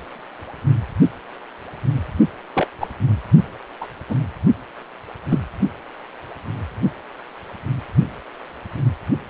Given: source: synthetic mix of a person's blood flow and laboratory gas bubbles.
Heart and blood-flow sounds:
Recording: Doppler ultrasound of blood flow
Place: precordium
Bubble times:
2.54-2.67 s: bubbles
2.80-2.88 s: bubbles
3.81-3.87 s: bubbles
4.09-4.15 s: bubbles
5.29-5.39 s: bubbles
From the record:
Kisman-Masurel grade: 122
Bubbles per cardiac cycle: 1 to 2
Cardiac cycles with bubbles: 10 to 50%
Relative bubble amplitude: moderate (0.250 to 0.450)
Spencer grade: 2 (many but less than half of the cardiac periods contain bubble signals, singularly or in groups)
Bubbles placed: only in the low amplitude regions of the cardiac cycle

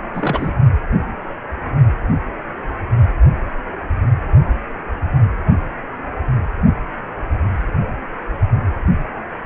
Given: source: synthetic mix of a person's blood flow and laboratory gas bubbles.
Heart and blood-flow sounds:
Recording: Doppler ultrasound of blood flow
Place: precordium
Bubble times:
0.13-0.55 s: bubbles
From the record:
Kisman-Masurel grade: 212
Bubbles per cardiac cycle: several, 3 to 8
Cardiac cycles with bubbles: 1 to 10%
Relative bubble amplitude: moderate (0.250 to 0.450)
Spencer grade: 1 (occasional bubble signal discernible with the cardiac motion signal, with majority of cardiac periods free of bubbles)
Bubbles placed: only in the low amplitude regions of the cardiac cycle

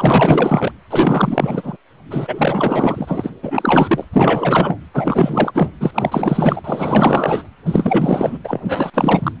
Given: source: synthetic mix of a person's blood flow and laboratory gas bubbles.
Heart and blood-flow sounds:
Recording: Doppler ultrasound of blood flow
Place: precordium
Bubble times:
0.00-0.72 s: bubbles
0.90-1.77 s: bubbles
2.10-3.31 s: bubbles
3.43-4.04 s: bubbles
4.13-4.78 s: bubbles
4.93-5.51 s: bubbles
5.54-5.70 s: bubbles
5.80-5.91 s: bubbles
5.94-6.61 s: bubbles
6.64-7.43 s: bubbles
7.66-8.38 s: bubbles
8.44-8.61 s: bubbles
8.63-8.90 s: bubbles
8.93-9.32 s: bubbles
From the record:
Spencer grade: 4 (maximum detectable bubble signal sounding continuously throughout systole and diastole of every cardiac period, and overriding the amplitude of the normal cardiac signals)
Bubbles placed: anywhere in the cardiac cycle

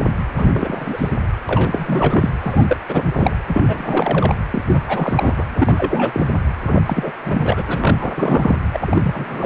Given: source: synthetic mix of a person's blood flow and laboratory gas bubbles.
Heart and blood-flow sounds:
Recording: Doppler ultrasound of blood flow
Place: precordium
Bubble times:
0.00-0.04 s: bubbles
0.37-0.50 s: bubbles
0.53-1.09 s: bubbles
1.49-2.29 s: bubbles
2.41-2.77 s: bubbles
2.89-3.37 s: bubbles
3.46-4.35 s: bubbles
4.50-4.62 s: bubbles
4.67-4.81 s: bubbles
4.88-5.44 s: bubbles
5.56-6.32 s: bubbles
6.67-6.82 s: bubbles
6.85-7.14 s: bubbles
7.22-7.63 s: bubbles
7.67-8.56 s: bubbles
8.74-9.46 s: bubbles
From the record:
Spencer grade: 3 (all of the cardiac periods contain showers or single bubble signals, but not dominating or overriding the cardiac motion signals)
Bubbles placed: anywhere in the cardiac cycle

